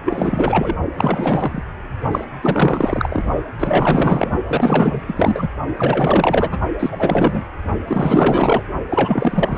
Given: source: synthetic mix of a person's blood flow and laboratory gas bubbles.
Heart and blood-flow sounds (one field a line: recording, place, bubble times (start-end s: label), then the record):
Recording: Doppler ultrasound of blood flow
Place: precordium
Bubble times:
0.05-0.77 s: bubbles
0.98-1.63 s: bubbles
2.11-2.25 s: bubbles
2.41-3.24 s: bubbles
3.60-4.30 s: bubbles
4.47-5.02 s: bubbles
5.07-5.49 s: bubbles
5.76-6.58 s: bubbles
6.79-7.43 s: bubbles
7.87-8.63 s: bubbles
8.88-9.58 s: bubbles
From the record:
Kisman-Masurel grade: 444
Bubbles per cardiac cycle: continuous sound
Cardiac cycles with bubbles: 100%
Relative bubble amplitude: maximal (0.775 to 0.999)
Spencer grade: 4 (maximum detectable bubble signal sounding continuously throughout systole and diastole of every cardiac period, and overriding the amplitude of the normal cardiac signals)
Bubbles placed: only in the low amplitude regions of the cardiac cycle